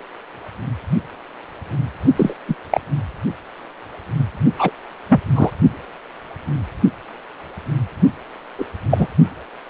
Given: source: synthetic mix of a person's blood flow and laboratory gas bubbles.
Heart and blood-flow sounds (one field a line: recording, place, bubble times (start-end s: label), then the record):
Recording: Doppler ultrasound of blood flow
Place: precordium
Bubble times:
2.17-2.34 s: bubbles
2.48-2.55 s: bubbles
2.71-2.81 s: bubbles
4.58-4.71 s: bubbles
5.08-5.21 s: bubbles
5.35-5.51 s: bubbles
8.58-8.65 s: bubbles
8.90-9.07 s: bubbles
From the record:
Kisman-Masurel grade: 223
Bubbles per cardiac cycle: several, 3 to 8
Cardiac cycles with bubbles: 10 to 50%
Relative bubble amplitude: loud (0.450 to 0.775)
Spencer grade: 2 (many but less than half of the cardiac periods contain bubble signals, singularly or in groups)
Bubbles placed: only in the low amplitude regions of the cardiac cycle